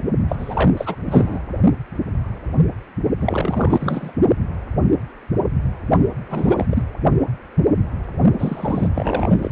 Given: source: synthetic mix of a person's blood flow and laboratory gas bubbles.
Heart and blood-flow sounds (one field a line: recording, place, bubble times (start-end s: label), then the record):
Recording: Doppler ultrasound of blood flow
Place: precordium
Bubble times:
0.28-0.70 s: bubbles
0.77-0.96 s: bubbles
1.05-1.40 s: bubbles
3.19-4.14 s: bubbles
6.26-6.67 s: bubbles
6.69-6.82 s: bubbles
8.38-8.88 s: bubbles
8.94-9.39 s: bubbles
9.42-9.51 s: bubbles
From the record:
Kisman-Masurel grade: 333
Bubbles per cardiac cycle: rolling drumbeat, 9 or more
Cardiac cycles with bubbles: 50 to 99%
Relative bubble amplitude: loud (0.450 to 0.775)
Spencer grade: 3 (all of the cardiac periods contain showers or single bubble signals, but not dominating or overriding the cardiac motion signals)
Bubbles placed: only in the low amplitude regions of the cardiac cycle